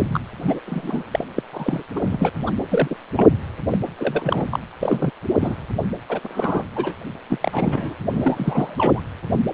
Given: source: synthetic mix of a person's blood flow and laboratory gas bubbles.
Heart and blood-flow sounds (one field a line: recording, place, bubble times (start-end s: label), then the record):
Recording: Doppler ultrasound of blood flow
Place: precordium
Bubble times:
0.00-0.19 s: bubbles
0.37-0.59 s: bubbles
0.66-1.03 s: bubbles
1.11-1.24 s: bubbles
1.36-1.43 s: bubbles
1.53-1.83 s: bubbles
1.96-2.00 s: bubbles
2.03-2.31 s: bubbles
2.46-2.52 s: bubbles
2.71-2.96 s: bubbles
3.15-3.29 s: bubbles
3.69-3.78 s: bubbles
3.99-4.46 s: bubbles
4.50-4.59 s: bubbles
4.82-5.10 s: bubbles
5.40-5.55 s: bubbles
6.08-6.20 s: bubbles
6.23-6.63 s: bubbles
6.75-6.94 s: bubbles
7.29-7.37 s: bubbles
7.41-7.94 s: bubbles
8.11-9.01 s: bubbles
From the record:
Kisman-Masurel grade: 232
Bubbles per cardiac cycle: several, 3 to 8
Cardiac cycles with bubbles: 50 to 99%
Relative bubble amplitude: moderate (0.250 to 0.450)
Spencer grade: 3 (all of the cardiac periods contain showers or single bubble signals, but not dominating or overriding the cardiac motion signals)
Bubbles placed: anywhere in the cardiac cycle